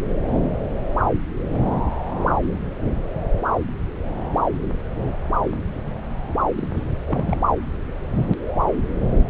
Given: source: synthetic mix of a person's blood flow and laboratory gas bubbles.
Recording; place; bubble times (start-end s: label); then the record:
Doppler ultrasound of blood flow; subclavian vein
6.57-6.71 s: bubbles
6.75-6.83 s: bubbles
7.06-7.38 s: bubbles
From the record:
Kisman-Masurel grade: 211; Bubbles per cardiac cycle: several, 3 to 8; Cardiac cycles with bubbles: 1 to 10%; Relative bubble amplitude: barely perceptible (0.100 to 0.250); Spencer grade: 1 (occasional bubble signal discernible with the cardiac motion signal, with majority of cardiac periods free of bubbles); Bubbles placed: anywhere in the cardiac cycle